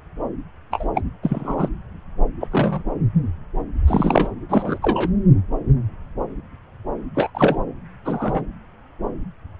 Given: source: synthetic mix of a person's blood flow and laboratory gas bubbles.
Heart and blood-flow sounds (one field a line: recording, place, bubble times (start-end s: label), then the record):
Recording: Doppler ultrasound of blood flow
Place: subclavian vein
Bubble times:
0.70-0.88 s: bubbles
0.94-1.01 s: bubbles
1.23-1.69 s: bubbles
2.40-2.48 s: bubbles
2.51-2.83 s: bubbles
3.87-4.33 s: bubbles
4.49-4.78 s: bubbles
4.82-5.11 s: bubbles
7.15-7.30 s: bubbles
7.34-7.58 s: bubbles
8.04-8.43 s: bubbles
From the record:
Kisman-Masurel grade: 223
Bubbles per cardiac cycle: several, 3 to 8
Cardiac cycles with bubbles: 10 to 50%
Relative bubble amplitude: loud (0.450 to 0.775)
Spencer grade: 2 (many but less than half of the cardiac periods contain bubble signals, singularly or in groups)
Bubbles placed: anywhere in the cardiac cycle